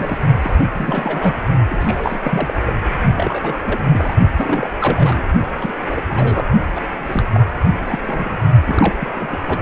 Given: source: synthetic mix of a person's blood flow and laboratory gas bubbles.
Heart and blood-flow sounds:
Doppler ultrasound of blood flow; precordium
0.00-0.18 s: bubbles
0.41-0.55 s: bubbles
0.74-1.34 s: bubbles
1.70-2.20 s: bubbles
2.23-2.54 s: bubbles
2.66-2.73 s: bubbles
3.16-3.79 s: bubbles
3.93-4.16 s: bubbles
4.37-4.70 s: bubbles
4.80-5.24 s: bubbles
5.57-6.01 s: bubbles
6.09-6.48 s: bubbles
6.75-6.80 s: bubbles
7.07-7.23 s: bubbles
7.33-7.41 s: bubbles
7.86-7.99 s: bubbles
8.04-8.42 s: bubbles
8.67-8.94 s: bubbles
9.00-9.12 s: bubbles
9.14-9.38 s: bubbles
9.46-9.61 s: bubbles
From the record:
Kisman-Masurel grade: 342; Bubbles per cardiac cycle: rolling drumbeat, 9 or more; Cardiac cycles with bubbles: 100%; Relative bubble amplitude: moderate (0.250 to 0.450); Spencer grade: 3 (all of the cardiac periods contain showers or single bubble signals, but not dominating or overriding the cardiac motion signals); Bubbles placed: only in the low amplitude regions of the cardiac cycle

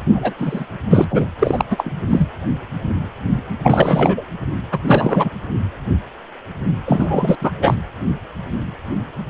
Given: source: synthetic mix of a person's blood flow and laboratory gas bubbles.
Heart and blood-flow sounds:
Doppler ultrasound of blood flow; precordium
0.10-0.33 s: bubbles
0.39-0.66 s: bubbles
0.90-1.07 s: bubbles
1.10-1.25 s: bubbles
1.39-1.65 s: bubbles
1.71-1.90 s: bubbles
2.09-2.29 s: bubbles
3.63-4.22 s: bubbles
4.71-4.79 s: bubbles
4.84-5.31 s: bubbles
6.85-7.36 s: bubbles
7.41-7.51 s: bubbles
7.62-7.74 s: bubbles
From the record:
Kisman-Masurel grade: 333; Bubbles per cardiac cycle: rolling drumbeat, 9 or more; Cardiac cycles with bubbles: 50 to 99%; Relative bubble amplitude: loud (0.450 to 0.775); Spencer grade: 3 (all of the cardiac periods contain showers or single bubble signals, but not dominating or overriding the cardiac motion signals); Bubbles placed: anywhere in the cardiac cycle

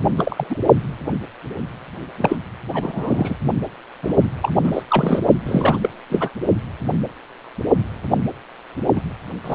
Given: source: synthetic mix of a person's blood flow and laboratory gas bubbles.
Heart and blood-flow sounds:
Doppler ultrasound of blood flow; precordium
0.18-0.57 s: bubbles
2.18-2.36 s: bubbles
2.73-3.35 s: bubbles
4.03-4.14 s: bubbles
4.42-4.52 s: bubbles
4.54-4.83 s: bubbles
4.88-5.28 s: bubbles
5.45-5.94 s: bubbles
6.10-6.29 s: bubbles
8.95-9.01 s: bubbles
9.44-9.55 s: bubbles
From the record:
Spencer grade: 3 (all of the cardiac periods contain showers or single bubble signals, but not dominating or overriding the cardiac motion signals); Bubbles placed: only in the low amplitude regions of the cardiac cycle

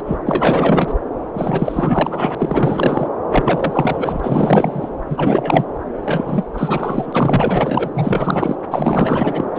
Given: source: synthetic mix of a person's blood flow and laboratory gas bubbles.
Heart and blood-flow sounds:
Doppler ultrasound of blood flow; subclavian vein
0.07-0.17 s: bubbles
0.26-0.93 s: bubbles
1.33-2.35 s: bubbles
2.38-3.08 s: bubbles
3.30-4.90 s: bubbles
5.09-5.66 s: bubbles
6.05-6.47 s: bubbles
6.54-7.90 s: bubbles
7.93-8.55 s: bubbles
8.71-9.45 s: bubbles
9.55-9.59 s: bubbles
From the record:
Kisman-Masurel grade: 444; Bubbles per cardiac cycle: continuous sound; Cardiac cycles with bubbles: 100%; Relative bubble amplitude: maximal (0.775 to 0.999); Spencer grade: 4 (maximum detectable bubble signal sounding continuously throughout systole and diastole of every cardiac period, and overriding the amplitude of the normal cardiac signals); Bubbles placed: anywhere in the cardiac cycle

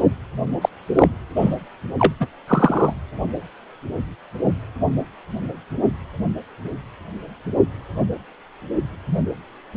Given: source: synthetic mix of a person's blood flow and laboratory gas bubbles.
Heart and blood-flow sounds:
Doppler ultrasound of blood flow; precordium
0.61-0.69 s: bubbles
0.95-1.08 s: bubbles
1.35-1.56 s: bubbles
1.98-2.15 s: bubbles
2.19-2.27 s: bubbles
2.48-2.94 s: bubbles
From the record:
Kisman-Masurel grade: 123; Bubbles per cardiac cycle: 1 to 2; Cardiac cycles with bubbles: 10 to 50%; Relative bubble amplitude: loud (0.450 to 0.775); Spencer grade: 2 (many but less than half of the cardiac periods contain bubble signals, singularly or in groups); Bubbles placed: anywhere in the cardiac cycle

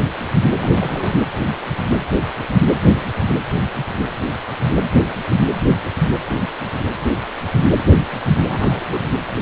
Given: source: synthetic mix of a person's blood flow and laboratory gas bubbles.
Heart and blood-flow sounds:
Doppler ultrasound of blood flow; precordium
0.56-1.17 s: bubbles
8.48-9.12 s: bubbles
From the record:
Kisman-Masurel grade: 221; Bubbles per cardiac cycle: several, 3 to 8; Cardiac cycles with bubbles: 10 to 50%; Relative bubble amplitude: barely perceptible (0.100 to 0.250); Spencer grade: 2 (many but less than half of the cardiac periods contain bubble signals, singularly or in groups); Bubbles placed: anywhere in the cardiac cycle

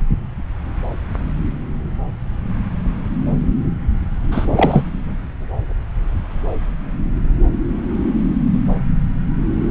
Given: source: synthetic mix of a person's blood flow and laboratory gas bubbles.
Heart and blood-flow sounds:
Doppler ultrasound of blood flow; subclavian vein
4.31-4.47 s: bubbles
4.55-4.83 s: bubbles
From the record:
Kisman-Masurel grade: 213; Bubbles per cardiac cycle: several, 3 to 8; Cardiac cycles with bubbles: 1 to 10%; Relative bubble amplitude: loud (0.450 to 0.775); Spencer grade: 1 (occasional bubble signal discernible with the cardiac motion signal, with majority of cardiac periods free of bubbles); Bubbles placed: anywhere in the cardiac cycle

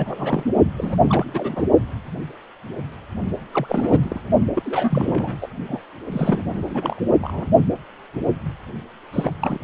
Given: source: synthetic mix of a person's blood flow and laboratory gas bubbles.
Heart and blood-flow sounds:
Doppler ultrasound of blood flow; precordium
0.00-0.43 s: bubbles
0.77-1.65 s: bubbles
3.54-4.21 s: bubbles
4.54-5.37 s: bubbles
5.41-5.47 s: bubbles
5.67-5.82 s: bubbles
6.12-6.45 s: bubbles
6.53-7.00 s: bubbles
7.20-7.46 s: bubbles
9.12-9.32 s: bubbles
9.39-9.59 s: bubbles
From the record:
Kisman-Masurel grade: 332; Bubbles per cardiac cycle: rolling drumbeat, 9 or more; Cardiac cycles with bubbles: 50 to 99%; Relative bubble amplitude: moderate (0.250 to 0.450); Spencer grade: 3 (all of the cardiac periods contain showers or single bubble signals, but not dominating or overriding the cardiac motion signals); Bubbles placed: only in the low amplitude regions of the cardiac cycle

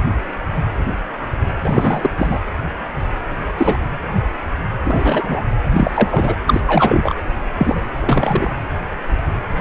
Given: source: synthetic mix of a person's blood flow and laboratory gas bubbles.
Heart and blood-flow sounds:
Doppler ultrasound of blood flow; precordium
1.64-2.10 s: bubbles
2.18-2.40 s: bubbles
3.57-3.77 s: bubbles
4.84-5.44 s: bubbles
5.71-6.36 s: bubbles
6.46-6.60 s: bubbles
6.67-7.14 s: bubbles
7.58-7.84 s: bubbles
7.99-8.51 s: bubbles
From the record:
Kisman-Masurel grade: 233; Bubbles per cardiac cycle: several, 3 to 8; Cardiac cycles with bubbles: 50 to 99%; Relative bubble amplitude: loud (0.450 to 0.775); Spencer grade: 3 (all of the cardiac periods contain showers or single bubble signals, but not dominating or overriding the cardiac motion signals); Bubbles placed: anywhere in the cardiac cycle

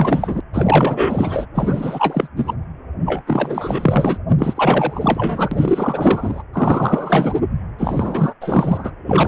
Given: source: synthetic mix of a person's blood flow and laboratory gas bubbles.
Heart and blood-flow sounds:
Doppler ultrasound of blood flow; precordium
0.00-0.40 s: bubbles
0.53-1.46 s: bubbles
1.55-2.28 s: bubbles
2.37-2.56 s: bubbles
3.06-3.23 s: bubbles
3.27-4.17 s: bubbles
4.29-6.42 s: bubbles
6.53-7.41 s: bubbles
7.79-8.34 s: bubbles
8.40-8.92 s: bubbles
9.06-9.28 s: bubbles
From the record:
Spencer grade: 4 (maximum detectable bubble signal sounding continuously throughout systole and diastole of every cardiac period, and overriding the amplitude of the normal cardiac signals); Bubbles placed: anywhere in the cardiac cycle

